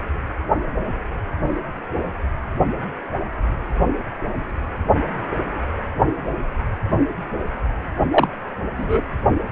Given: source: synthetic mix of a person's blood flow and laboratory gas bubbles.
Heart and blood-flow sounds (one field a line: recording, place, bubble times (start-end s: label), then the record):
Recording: Doppler ultrasound of blood flow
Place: precordium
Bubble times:
8.12-8.28 s: bubbles
8.77-9.02 s: bubbles
From the record:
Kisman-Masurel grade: 213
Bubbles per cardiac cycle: several, 3 to 8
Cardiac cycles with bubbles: 1 to 10%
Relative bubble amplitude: loud (0.450 to 0.775)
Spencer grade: 1 (occasional bubble signal discernible with the cardiac motion signal, with majority of cardiac periods free of bubbles)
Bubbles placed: only in the low amplitude regions of the cardiac cycle